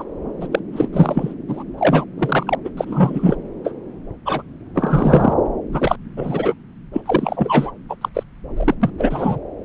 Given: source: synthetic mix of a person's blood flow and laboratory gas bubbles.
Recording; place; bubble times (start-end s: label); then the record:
Doppler ultrasound of blood flow; subclavian vein
0.00-0.03 s: bubbles
0.40-0.47 s: bubbles
0.51-0.59 s: bubbles
0.72-0.88 s: bubbles
0.92-1.34 s: bubbles
1.47-1.64 s: bubbles
1.78-2.05 s: bubbles
2.18-2.55 s: bubbles
2.64-2.70 s: bubbles
2.77-3.36 s: bubbles
3.64-3.75 s: bubbles
4.25-4.42 s: bubbles
4.74-5.33 s: bubbles
5.71-5.96 s: bubbles
6.17-6.54 s: bubbles
6.92-7.01 s: bubbles
7.05-7.71 s: bubbles
7.89-7.96 s: bubbles
8.01-8.09 s: bubbles
8.14-8.23 s: bubbles
8.56-8.75 s: bubbles
8.81-8.90 s: bubbles
8.98-9.38 s: bubbles
From the record:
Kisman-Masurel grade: 243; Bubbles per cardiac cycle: several, 3 to 8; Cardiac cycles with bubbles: 100%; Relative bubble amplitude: loud (0.450 to 0.775); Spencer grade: 3 (all of the cardiac periods contain showers or single bubble signals, but not dominating or overriding the cardiac motion signals); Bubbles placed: anywhere in the cardiac cycle